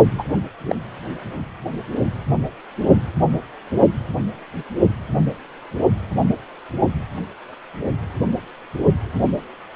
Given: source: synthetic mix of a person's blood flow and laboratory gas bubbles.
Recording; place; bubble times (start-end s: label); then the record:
Doppler ultrasound of blood flow; precordium
0.18-0.24 s: bubbles
0.66-0.76 s: bubbles
From the record:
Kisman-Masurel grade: 112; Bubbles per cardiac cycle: 1 to 2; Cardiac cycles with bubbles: 1 to 10%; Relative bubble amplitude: moderate (0.250 to 0.450); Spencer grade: 1 (occasional bubble signal discernible with the cardiac motion signal, with majority of cardiac periods free of bubbles); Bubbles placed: only in the low amplitude regions of the cardiac cycle